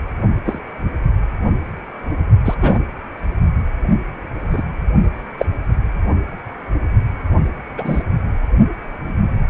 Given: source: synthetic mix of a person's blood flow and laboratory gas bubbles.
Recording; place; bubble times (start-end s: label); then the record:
Doppler ultrasound of blood flow; precordium
0.45-0.60 s: bubbles
2.45-2.54 s: bubbles
2.61-2.81 s: bubbles
4.50-4.62 s: bubbles
5.38-5.46 s: bubbles
7.77-8.03 s: bubbles
From the record:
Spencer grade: 2 (many but less than half of the cardiac periods contain bubble signals, singularly or in groups); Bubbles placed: only in the low amplitude regions of the cardiac cycle